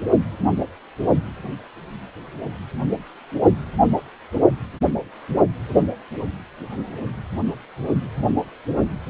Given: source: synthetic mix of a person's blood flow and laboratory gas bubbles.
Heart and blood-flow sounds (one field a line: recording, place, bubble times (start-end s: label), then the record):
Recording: Doppler ultrasound of blood flow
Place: precordium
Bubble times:
no bubbles
From the record:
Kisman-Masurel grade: 000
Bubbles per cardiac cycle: 0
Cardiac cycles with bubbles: 0%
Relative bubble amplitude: no bubbles discernible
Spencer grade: 0 (complete lack of bubble signals)